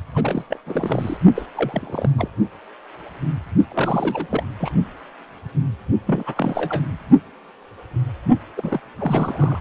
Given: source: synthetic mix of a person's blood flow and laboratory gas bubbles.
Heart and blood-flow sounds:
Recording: Doppler ultrasound of blood flow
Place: precordium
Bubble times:
0.15-0.45 s: bubbles
0.50-0.58 s: bubbles
0.66-1.17 s: bubbles
1.35-1.46 s: bubbles
1.55-2.10 s: bubbles
2.18-2.28 s: bubbles
3.70-4.43 s: bubbles
4.59-4.74 s: bubbles
6.06-6.23 s: bubbles
6.26-6.82 s: bubbles
8.57-8.79 s: bubbles
8.99-9.59 s: bubbles
From the record:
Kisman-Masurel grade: 332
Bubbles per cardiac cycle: rolling drumbeat, 9 or more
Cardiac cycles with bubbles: 50 to 99%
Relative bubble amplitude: moderate (0.250 to 0.450)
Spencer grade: 3 (all of the cardiac periods contain showers or single bubble signals, but not dominating or overriding the cardiac motion signals)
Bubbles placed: only in the low amplitude regions of the cardiac cycle

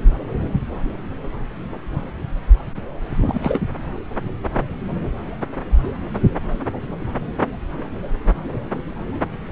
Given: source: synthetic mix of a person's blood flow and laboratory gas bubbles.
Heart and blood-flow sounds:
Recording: Doppler ultrasound of blood flow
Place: subclavian vein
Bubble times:
3.16-3.59 s: bubbles
From the record:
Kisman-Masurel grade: 212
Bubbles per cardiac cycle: several, 3 to 8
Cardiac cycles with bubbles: 1 to 10%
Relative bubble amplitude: moderate (0.250 to 0.450)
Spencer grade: 1 (occasional bubble signal discernible with the cardiac motion signal, with majority of cardiac periods free of bubbles)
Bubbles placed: anywhere in the cardiac cycle

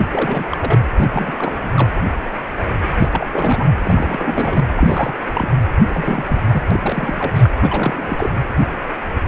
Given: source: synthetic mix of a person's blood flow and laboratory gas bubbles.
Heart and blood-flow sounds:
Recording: Doppler ultrasound of blood flow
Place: precordium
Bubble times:
0.00-0.02 s: bubbles
0.10-0.78 s: bubbles
0.96-1.07 s: bubbles
1.13-1.33 s: bubbles
1.39-1.71 s: bubbles
1.74-1.90 s: bubbles
2.92-3.09 s: bubbles
3.12-3.27 s: bubbles
3.33-3.67 s: bubbles
3.83-4.67 s: bubbles
4.75-5.13 s: bubbles
5.34-5.49 s: bubbles
5.78-5.85 s: bubbles
5.88-6.41 s: bubbles
6.49-6.63 s: bubbles
6.71-7.51 s: bubbles
7.62-8.39 s: bubbles
From the record:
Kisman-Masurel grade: 332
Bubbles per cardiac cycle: rolling drumbeat, 9 or more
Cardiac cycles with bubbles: 50 to 99%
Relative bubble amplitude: moderate (0.250 to 0.450)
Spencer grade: 3 (all of the cardiac periods contain showers or single bubble signals, but not dominating or overriding the cardiac motion signals)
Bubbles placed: anywhere in the cardiac cycle

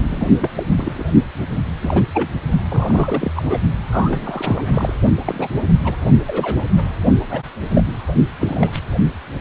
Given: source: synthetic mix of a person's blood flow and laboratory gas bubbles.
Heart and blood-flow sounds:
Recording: Doppler ultrasound of blood flow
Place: precordium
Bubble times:
0.09-0.28 s: bubbles
0.39-0.50 s: bubbles
0.56-0.63 s: bubbles
0.77-1.04 s: bubbles
1.82-2.03 s: bubbles
2.14-2.29 s: bubbles
2.69-3.33 s: bubbles
3.36-3.43 s: bubbles
3.50-3.58 s: bubbles
3.82-4.96 s: bubbles
5.25-5.49 s: bubbles
5.84-5.96 s: bubbles
6.26-6.66 s: bubbles
6.76-6.83 s: bubbles
7.29-7.42 s: bubbles
7.73-7.83 s: bubbles
7.99-8.12 s: bubbles
8.39-8.79 s: bubbles
From the record:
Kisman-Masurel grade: 242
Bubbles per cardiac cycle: several, 3 to 8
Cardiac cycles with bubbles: 100%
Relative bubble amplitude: moderate (0.250 to 0.450)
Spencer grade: 3 (all of the cardiac periods contain showers or single bubble signals, but not dominating or overriding the cardiac motion signals)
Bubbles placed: only in the low amplitude regions of the cardiac cycle

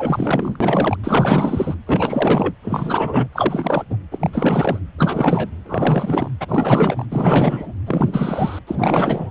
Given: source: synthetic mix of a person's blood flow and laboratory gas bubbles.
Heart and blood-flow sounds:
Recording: Doppler ultrasound of blood flow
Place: precordium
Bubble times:
0.00-0.56 s: bubbles
0.60-0.97 s: bubbles
1.03-1.75 s: bubbles
1.86-2.53 s: bubbles
2.62-3.27 s: bubbles
3.32-3.84 s: bubbles
3.90-3.96 s: bubbles
4.11-4.30 s: bubbles
4.33-4.79 s: bubbles
4.98-5.51 s: bubbles
5.65-6.30 s: bubbles
6.40-7.06 s: bubbles
7.12-7.73 s: bubbles
7.86-8.59 s: bubbles
8.67-9.30 s: bubbles
From the record:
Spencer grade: 4 (maximum detectable bubble signal sounding continuously throughout systole and diastole of every cardiac period, and overriding the amplitude of the normal cardiac signals)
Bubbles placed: anywhere in the cardiac cycle

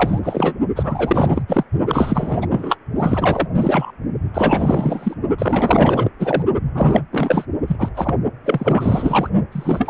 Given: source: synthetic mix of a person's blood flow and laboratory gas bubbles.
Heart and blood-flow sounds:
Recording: Doppler ultrasound of blood flow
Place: precordium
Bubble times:
0.00-0.20 s: bubbles
0.23-0.54 s: bubbles
0.76-1.42 s: bubbles
1.47-1.64 s: bubbles
1.87-2.47 s: bubbles
2.51-2.76 s: bubbles
2.99-3.48 s: bubbles
3.56-3.92 s: bubbles
4.34-5.14 s: bubbles
5.38-6.09 s: bubbles
6.19-6.42 s: bubbles
6.75-7.04 s: bubbles
7.11-7.45 s: bubbles
7.67-7.90 s: bubbles
7.95-8.15 s: bubbles
8.45-9.29 s: bubbles
9.52-9.90 s: bubbles
From the record:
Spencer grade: 4 (maximum detectable bubble signal sounding continuously throughout systole and diastole of every cardiac period, and overriding the amplitude of the normal cardiac signals)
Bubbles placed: only in the low amplitude regions of the cardiac cycle

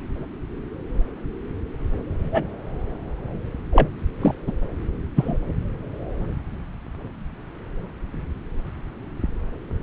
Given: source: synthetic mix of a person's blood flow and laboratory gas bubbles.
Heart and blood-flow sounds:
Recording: Doppler ultrasound of blood flow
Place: subclavian vein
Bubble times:
2.32-2.44 s: bubbles
3.72-3.88 s: bubbles
4.21-4.35 s: bubbles
4.47-4.52 s: bubbles
5.15-5.38 s: bubbles
From the record:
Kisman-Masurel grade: 123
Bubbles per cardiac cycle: 1 to 2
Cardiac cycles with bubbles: 10 to 50%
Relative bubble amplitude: loud (0.450 to 0.775)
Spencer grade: 2 (many but less than half of the cardiac periods contain bubble signals, singularly or in groups)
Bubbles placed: anywhere in the cardiac cycle

